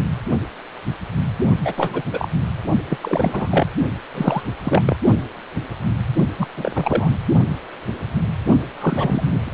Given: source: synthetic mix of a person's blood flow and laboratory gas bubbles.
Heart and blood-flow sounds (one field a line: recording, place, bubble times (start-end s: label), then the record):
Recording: Doppler ultrasound of blood flow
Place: precordium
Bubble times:
1.64-2.03 s: bubbles
2.12-2.29 s: bubbles
2.89-2.99 s: bubbles
3.01-3.67 s: bubbles
4.14-4.43 s: bubbles
4.63-4.82 s: bubbles
4.85-4.96 s: bubbles
6.38-6.47 s: bubbles
6.56-7.10 s: bubbles
8.80-9.50 s: bubbles
From the record:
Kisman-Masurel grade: 332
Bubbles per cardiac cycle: rolling drumbeat, 9 or more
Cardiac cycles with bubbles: 50 to 99%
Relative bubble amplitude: moderate (0.250 to 0.450)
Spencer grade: 3 (all of the cardiac periods contain showers or single bubble signals, but not dominating or overriding the cardiac motion signals)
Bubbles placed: only in the low amplitude regions of the cardiac cycle